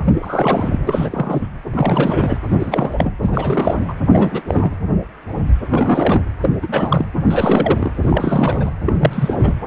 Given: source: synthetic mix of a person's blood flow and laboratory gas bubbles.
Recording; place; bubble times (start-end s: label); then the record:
Doppler ultrasound of blood flow; precordium
0.05-0.84 s: bubbles
0.87-1.48 s: bubbles
1.71-2.37 s: bubbles
2.50-3.14 s: bubbles
3.23-3.94 s: bubbles
4.09-4.42 s: bubbles
4.48-4.77 s: bubbles
5.70-6.22 s: bubbles
6.42-6.58 s: bubbles
6.62-7.05 s: bubbles
7.20-7.92 s: bubbles
8.01-8.71 s: bubbles
8.85-8.93 s: bubbles
9.00-9.55 s: bubbles
9.64-9.67 s: bubbles
From the record:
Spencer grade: 3 (all of the cardiac periods contain showers or single bubble signals, but not dominating or overriding the cardiac motion signals); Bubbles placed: anywhere in the cardiac cycle